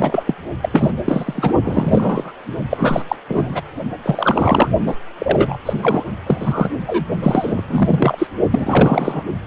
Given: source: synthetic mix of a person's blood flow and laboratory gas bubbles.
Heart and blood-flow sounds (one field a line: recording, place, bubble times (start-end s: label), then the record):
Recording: Doppler ultrasound of blood flow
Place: precordium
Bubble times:
0.00-0.24 s: bubbles
0.27-0.35 s: bubbles
0.61-0.69 s: bubbles
0.73-0.91 s: bubbles
1.05-1.52 s: bubbles
1.64-2.33 s: bubbles
2.70-3.02 s: bubbles
3.08-3.16 s: bubbles
3.27-3.62 s: bubbles
4.03-4.69 s: bubbles
4.86-4.95 s: bubbles
5.18-5.57 s: bubbles
5.65-6.03 s: bubbles
6.26-6.69 s: bubbles
6.86-7.05 s: bubbles
7.22-7.64 s: bubbles
7.69-8.27 s: bubbles
8.51-9.24 s: bubbles
From the record:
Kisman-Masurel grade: 343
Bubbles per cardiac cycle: rolling drumbeat, 9 or more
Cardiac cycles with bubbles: 100%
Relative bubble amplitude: loud (0.450 to 0.775)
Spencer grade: 3 (all of the cardiac periods contain showers or single bubble signals, but not dominating or overriding the cardiac motion signals)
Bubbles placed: only in the low amplitude regions of the cardiac cycle